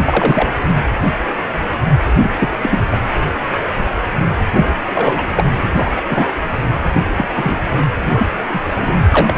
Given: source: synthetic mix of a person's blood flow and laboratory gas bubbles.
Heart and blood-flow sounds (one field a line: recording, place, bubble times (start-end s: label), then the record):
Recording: Doppler ultrasound of blood flow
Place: precordium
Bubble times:
0.00-0.49 s: bubbles
2.20-2.31 s: bubbles
2.39-2.60 s: bubbles
2.62-2.83 s: bubbles
2.90-2.98 s: bubbles
4.53-4.75 s: bubbles
4.94-5.25 s: bubbles
5.35-5.50 s: bubbles
5.74-5.92 s: bubbles
5.96-6.02 s: bubbles
6.08-6.32 s: bubbles
6.92-7.09 s: bubbles
7.16-7.25 s: bubbles
7.35-7.58 s: bubbles
7.93-8.29 s: bubbles
8.50-8.60 s: bubbles
8.76-8.97 s: bubbles
9.11-9.38 s: bubbles
From the record:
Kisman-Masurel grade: 233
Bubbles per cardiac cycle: several, 3 to 8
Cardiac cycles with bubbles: 50 to 99%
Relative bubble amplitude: loud (0.450 to 0.775)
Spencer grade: 3 (all of the cardiac periods contain showers or single bubble signals, but not dominating or overriding the cardiac motion signals)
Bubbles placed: anywhere in the cardiac cycle